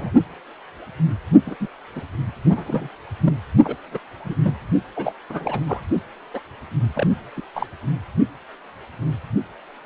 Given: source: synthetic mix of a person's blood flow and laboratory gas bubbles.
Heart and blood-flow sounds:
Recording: Doppler ultrasound of blood flow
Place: precordium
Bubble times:
0.00-0.11 s: bubbles
1.46-1.55 s: bubbles
1.60-1.68 s: bubbles
1.95-2.02 s: bubbles
2.50-2.88 s: bubbles
3.23-3.34 s: bubbles
3.63-3.75 s: bubbles
3.92-4.00 s: bubbles
4.24-4.35 s: bubbles
4.43-4.54 s: bubbles
4.96-5.12 s: bubbles
5.29-5.60 s: bubbles
5.67-5.81 s: bubbles
6.33-6.41 s: bubbles
6.95-7.07 s: bubbles
7.37-7.42 s: bubbles
7.55-7.67 s: bubbles
From the record:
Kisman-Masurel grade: 222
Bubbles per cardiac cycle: several, 3 to 8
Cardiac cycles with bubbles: 10 to 50%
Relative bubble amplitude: moderate (0.250 to 0.450)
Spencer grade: 2 (many but less than half of the cardiac periods contain bubble signals, singularly or in groups)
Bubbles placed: only in the low amplitude regions of the cardiac cycle

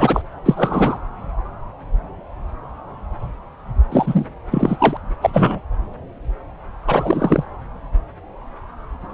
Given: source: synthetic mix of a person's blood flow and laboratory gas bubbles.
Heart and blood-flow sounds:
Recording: Doppler ultrasound of blood flow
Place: subclavian vein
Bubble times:
0.00-0.22 s: bubbles
0.45-0.98 s: bubbles
3.92-4.25 s: bubbles
4.50-4.97 s: bubbles
5.21-5.30 s: bubbles
5.33-5.60 s: bubbles
6.87-7.45 s: bubbles
From the record:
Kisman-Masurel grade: 233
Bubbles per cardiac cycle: several, 3 to 8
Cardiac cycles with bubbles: 50 to 99%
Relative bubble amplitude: loud (0.450 to 0.775)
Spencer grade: 3 (all of the cardiac periods contain showers or single bubble signals, but not dominating or overriding the cardiac motion signals)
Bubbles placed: anywhere in the cardiac cycle

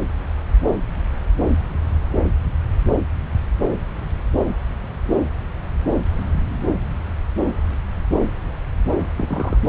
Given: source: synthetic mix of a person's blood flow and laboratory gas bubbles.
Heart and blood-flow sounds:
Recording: Doppler ultrasound of blood flow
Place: subclavian vein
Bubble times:
9.17-9.58 s: bubbles
From the record:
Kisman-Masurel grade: 111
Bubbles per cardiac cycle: 1 to 2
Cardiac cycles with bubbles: 1 to 10%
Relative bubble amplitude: barely perceptible (0.100 to 0.250)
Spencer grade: 1 (occasional bubble signal discernible with the cardiac motion signal, with majority of cardiac periods free of bubbles)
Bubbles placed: anywhere in the cardiac cycle

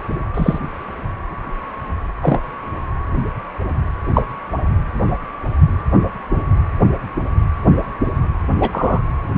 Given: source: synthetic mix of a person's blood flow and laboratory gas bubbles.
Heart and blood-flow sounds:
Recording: Doppler ultrasound of blood flow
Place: precordium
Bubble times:
0.34-0.58 s: bubbles
2.21-2.41 s: bubbles
4.14-4.22 s: bubbles
8.60-9.02 s: bubbles
From the record:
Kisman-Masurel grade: 123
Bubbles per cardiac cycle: 1 to 2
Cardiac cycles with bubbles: 10 to 50%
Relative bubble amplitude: loud (0.450 to 0.775)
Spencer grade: 2 (many but less than half of the cardiac periods contain bubble signals, singularly or in groups)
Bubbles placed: anywhere in the cardiac cycle

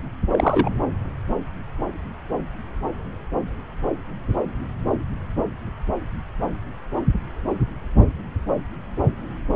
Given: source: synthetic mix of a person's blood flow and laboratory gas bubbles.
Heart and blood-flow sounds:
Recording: Doppler ultrasound of blood flow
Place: subclavian vein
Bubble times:
0.32-0.70 s: bubbles
From the record:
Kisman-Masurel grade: 113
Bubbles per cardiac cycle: 1 to 2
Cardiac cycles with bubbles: 1 to 10%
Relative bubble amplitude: loud (0.450 to 0.775)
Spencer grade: 1 (occasional bubble signal discernible with the cardiac motion signal, with majority of cardiac periods free of bubbles)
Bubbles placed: anywhere in the cardiac cycle

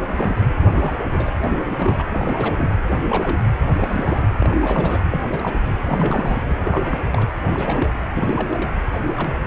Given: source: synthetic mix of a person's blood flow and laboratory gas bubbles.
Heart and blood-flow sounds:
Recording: Doppler ultrasound of blood flow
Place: precordium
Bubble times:
0.00-0.02 s: bubbles
0.08-0.47 s: bubbles
0.61-0.96 s: bubbles
1.10-1.33 s: bubbles
1.43-1.64 s: bubbles
1.72-2.04 s: bubbles
2.13-2.76 s: bubbles
2.91-2.97 s: bubbles
3.04-3.38 s: bubbles
3.70-5.04 s: bubbles
5.12-5.21 s: bubbles
5.28-5.60 s: bubbles
5.65-5.75 s: bubbles
5.87-6.43 s: bubbles
6.49-6.58 s: bubbles
6.63-7.28 s: bubbles
7.46-7.94 s: bubbles
8.14-8.71 s: bubbles
9.14-9.36 s: bubbles
From the record:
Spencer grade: 3 (all of the cardiac periods contain showers or single bubble signals, but not dominating or overriding the cardiac motion signals)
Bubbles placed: anywhere in the cardiac cycle

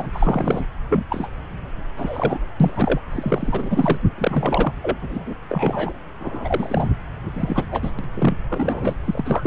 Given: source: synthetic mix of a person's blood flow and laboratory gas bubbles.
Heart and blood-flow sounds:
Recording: Doppler ultrasound of blood flow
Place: subclavian vein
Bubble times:
0.00-0.10 s: bubbles
0.14-0.66 s: bubbles
0.89-1.04 s: bubbles
1.09-1.28 s: bubbles
1.96-2.40 s: bubbles
2.60-3.00 s: bubbles
3.12-3.99 s: bubbles
4.17-4.75 s: bubbles
4.83-4.97 s: bubbles
5.01-5.36 s: bubbles
5.51-5.93 s: bubbles
6.20-6.88 s: bubbles
7.33-7.65 s: bubbles
7.71-7.91 s: bubbles
7.98-8.04 s: bubbles
8.14-8.34 s: bubbles
8.49-8.96 s: bubbles
9.04-9.47 s: bubbles
From the record:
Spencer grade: 3 (all of the cardiac periods contain showers or single bubble signals, but not dominating or overriding the cardiac motion signals)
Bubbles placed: anywhere in the cardiac cycle

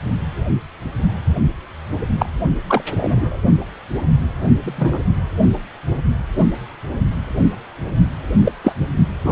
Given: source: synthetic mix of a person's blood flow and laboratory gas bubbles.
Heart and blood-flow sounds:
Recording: Doppler ultrasound of blood flow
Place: precordium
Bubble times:
2.18-2.26 s: bubbles
2.68-2.83 s: bubbles
2.91-3.37 s: bubbles
4.62-5.04 s: bubbles
8.45-8.52 s: bubbles
8.63-8.75 s: bubbles
9.24-9.32 s: bubbles
From the record:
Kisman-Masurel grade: 123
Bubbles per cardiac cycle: 1 to 2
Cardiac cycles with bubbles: 10 to 50%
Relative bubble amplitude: loud (0.450 to 0.775)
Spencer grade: 2 (many but less than half of the cardiac periods contain bubble signals, singularly or in groups)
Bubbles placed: only in the low amplitude regions of the cardiac cycle

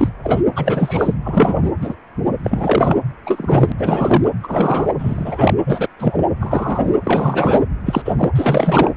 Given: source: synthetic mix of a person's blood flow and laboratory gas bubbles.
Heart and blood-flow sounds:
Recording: Doppler ultrasound of blood flow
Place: precordium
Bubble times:
0.00-0.09 s: bubbles
0.23-0.43 s: bubbles
0.55-1.15 s: bubbles
1.24-1.71 s: bubbles
1.81-1.95 s: bubbles
2.44-2.98 s: bubbles
3.26-3.72 s: bubbles
3.77-4.28 s: bubbles
4.43-4.94 s: bubbles
4.98-5.54 s: bubbles
5.66-5.88 s: bubbles
5.98-6.24 s: bubbles
6.40-6.94 s: bubbles
7.03-7.63 s: bubbles
7.85-8.02 s: bubbles
8.05-8.30 s: bubbles
8.35-8.91 s: bubbles
From the record:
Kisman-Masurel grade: 243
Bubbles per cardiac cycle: several, 3 to 8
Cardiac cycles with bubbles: 100%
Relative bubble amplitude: loud (0.450 to 0.775)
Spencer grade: 3 (all of the cardiac periods contain showers or single bubble signals, but not dominating or overriding the cardiac motion signals)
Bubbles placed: anywhere in the cardiac cycle

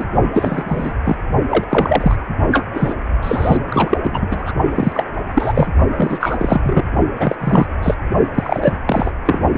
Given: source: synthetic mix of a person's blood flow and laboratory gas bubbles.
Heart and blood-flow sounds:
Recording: Doppler ultrasound of blood flow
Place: precordium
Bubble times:
0.00-0.04 s: bubbles
0.34-0.64 s: bubbles
0.68-0.93 s: bubbles
1.04-1.17 s: bubbles
1.48-1.64 s: bubbles
1.70-2.17 s: bubbles
2.51-2.65 s: bubbles
2.72-2.95 s: bubbles
3.23-3.58 s: bubbles
3.69-3.98 s: bubbles
4.00-4.54 s: bubbles
4.71-5.05 s: bubbles
5.35-5.67 s: bubbles
5.96-6.84 s: bubbles
7.19-7.36 s: bubbles
7.40-7.68 s: bubbles
7.83-7.94 s: bubbles
8.34-8.73 s: bubbles
8.85-9.11 s: bubbles
9.25-9.38 s: bubbles
9.53-9.58 s: bubbles
From the record:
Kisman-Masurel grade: 343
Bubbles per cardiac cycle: rolling drumbeat, 9 or more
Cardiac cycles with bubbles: 100%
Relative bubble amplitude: loud (0.450 to 0.775)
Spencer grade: 3 (all of the cardiac periods contain showers or single bubble signals, but not dominating or overriding the cardiac motion signals)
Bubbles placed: only in the low amplitude regions of the cardiac cycle

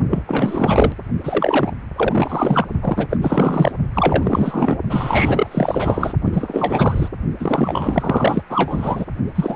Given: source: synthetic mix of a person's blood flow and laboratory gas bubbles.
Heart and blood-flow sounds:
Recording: Doppler ultrasound of blood flow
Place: precordium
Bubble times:
0.10-0.23 s: bubbles
0.26-0.95 s: bubbles
1.23-1.72 s: bubbles
1.96-2.68 s: bubbles
2.81-3.06 s: bubbles
3.10-3.18 s: bubbles
3.22-3.71 s: bubbles
3.95-4.77 s: bubbles
4.90-6.13 s: bubbles
6.25-7.09 s: bubbles
7.40-8.43 s: bubbles
8.50-9.05 s: bubbles
9.35-9.56 s: bubbles
From the record:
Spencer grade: 4 (maximum detectable bubble signal sounding continuously throughout systole and diastole of every cardiac period, and overriding the amplitude of the normal cardiac signals)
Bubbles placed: only in the low amplitude regions of the cardiac cycle

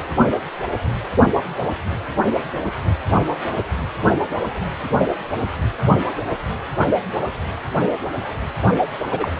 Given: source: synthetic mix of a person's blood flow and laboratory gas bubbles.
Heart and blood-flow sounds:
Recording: Doppler ultrasound of blood flow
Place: precordium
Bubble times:
9.11-9.30 s: bubbles
From the record:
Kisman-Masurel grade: 212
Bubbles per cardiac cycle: several, 3 to 8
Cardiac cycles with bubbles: 1 to 10%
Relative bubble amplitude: moderate (0.250 to 0.450)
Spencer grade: 1 (occasional bubble signal discernible with the cardiac motion signal, with majority of cardiac periods free of bubbles)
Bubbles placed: anywhere in the cardiac cycle

